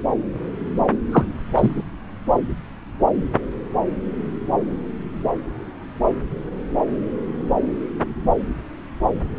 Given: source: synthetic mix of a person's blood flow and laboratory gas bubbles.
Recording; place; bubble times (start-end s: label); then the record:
Doppler ultrasound of blood flow; subclavian vein
1.11-1.25 s: bubbles
1.56-1.82 s: bubbles
From the record:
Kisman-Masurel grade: 213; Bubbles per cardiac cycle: several, 3 to 8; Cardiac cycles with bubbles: 1 to 10%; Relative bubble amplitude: loud (0.450 to 0.775); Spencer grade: 1 (occasional bubble signal discernible with the cardiac motion signal, with majority of cardiac periods free of bubbles); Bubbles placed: anywhere in the cardiac cycle